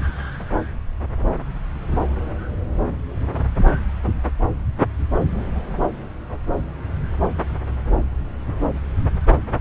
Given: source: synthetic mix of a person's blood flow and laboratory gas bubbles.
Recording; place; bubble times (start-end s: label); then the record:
Doppler ultrasound of blood flow; subclavian vein
no bubbles
From the record:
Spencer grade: 0 (complete lack of bubble signals)